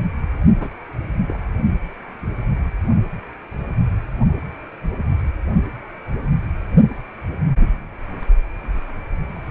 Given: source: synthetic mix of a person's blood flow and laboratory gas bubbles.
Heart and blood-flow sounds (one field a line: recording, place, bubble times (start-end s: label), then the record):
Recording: Doppler ultrasound of blood flow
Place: precordium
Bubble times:
0.60-0.69 s: bubbles
1.28-1.37 s: bubbles
From the record:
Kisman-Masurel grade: 111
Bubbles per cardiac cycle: 1 to 2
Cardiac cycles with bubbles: 1 to 10%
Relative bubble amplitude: barely perceptible (0.100 to 0.250)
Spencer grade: 1 (occasional bubble signal discernible with the cardiac motion signal, with majority of cardiac periods free of bubbles)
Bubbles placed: only in the low amplitude regions of the cardiac cycle